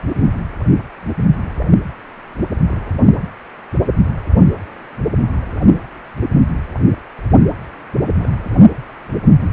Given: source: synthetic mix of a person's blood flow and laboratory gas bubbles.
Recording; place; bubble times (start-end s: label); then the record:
Doppler ultrasound of blood flow; precordium
2.70-2.88 s: bubbles
2.93-3.04 s: bubbles
8.18-8.29 s: bubbles
8.44-8.50 s: bubbles
From the record:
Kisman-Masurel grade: 211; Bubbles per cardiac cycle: several, 3 to 8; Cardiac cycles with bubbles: 1 to 10%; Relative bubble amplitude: barely perceptible (0.100 to 0.250); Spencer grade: 1 (occasional bubble signal discernible with the cardiac motion signal, with majority of cardiac periods free of bubbles); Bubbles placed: anywhere in the cardiac cycle